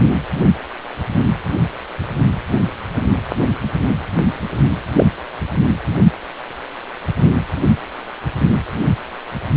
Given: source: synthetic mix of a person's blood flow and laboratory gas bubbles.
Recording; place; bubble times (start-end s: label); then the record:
Doppler ultrasound of blood flow; precordium
4.96-5.06 s: bubbles
From the record:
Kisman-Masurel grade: 113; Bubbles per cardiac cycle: 1 to 2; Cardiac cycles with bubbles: 1 to 10%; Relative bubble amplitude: loud (0.450 to 0.775); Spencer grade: 1 (occasional bubble signal discernible with the cardiac motion signal, with majority of cardiac periods free of bubbles); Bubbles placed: anywhere in the cardiac cycle